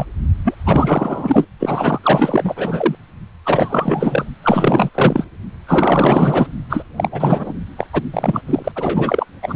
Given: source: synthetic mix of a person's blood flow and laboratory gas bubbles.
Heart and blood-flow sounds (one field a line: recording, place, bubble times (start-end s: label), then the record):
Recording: Doppler ultrasound of blood flow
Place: precordium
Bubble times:
0.00-0.05 s: bubbles
0.44-0.55 s: bubbles
0.64-1.47 s: bubbles
1.59-1.99 s: bubbles
2.03-2.95 s: bubbles
3.45-4.25 s: bubbles
4.43-4.90 s: bubbles
4.95-5.25 s: bubbles
5.67-6.47 s: bubbles
6.70-6.83 s: bubbles
6.97-7.08 s: bubbles
7.12-7.53 s: bubbles
7.77-7.88 s: bubbles
7.92-8.01 s: bubbles
8.13-8.41 s: bubbles
8.46-8.72 s: bubbles
8.75-9.25 s: bubbles
9.42-9.55 s: bubbles
From the record:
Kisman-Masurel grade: 444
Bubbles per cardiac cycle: continuous sound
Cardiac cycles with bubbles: 100%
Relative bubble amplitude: maximal (0.775 to 0.999)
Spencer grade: 4 (maximum detectable bubble signal sounding continuously throughout systole and diastole of every cardiac period, and overriding the amplitude of the normal cardiac signals)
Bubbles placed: only in the low amplitude regions of the cardiac cycle